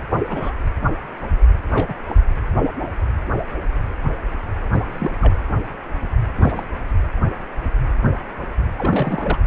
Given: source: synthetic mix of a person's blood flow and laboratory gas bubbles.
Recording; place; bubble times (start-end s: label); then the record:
Doppler ultrasound of blood flow; precordium
0.10-0.16 s: bubbles
0.26-0.53 s: bubbles
1.71-1.94 s: bubbles
2.09-2.15 s: bubbles
4.72-4.81 s: bubbles
4.92-5.12 s: bubbles
5.21-5.33 s: bubbles
6.36-6.63 s: bubbles
8.78-9.39 s: bubbles
From the record:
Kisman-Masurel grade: 221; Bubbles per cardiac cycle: several, 3 to 8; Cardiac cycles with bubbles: 10 to 50%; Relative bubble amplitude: barely perceptible (0.100 to 0.250); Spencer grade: 2 (many but less than half of the cardiac periods contain bubble signals, singularly or in groups); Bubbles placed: anywhere in the cardiac cycle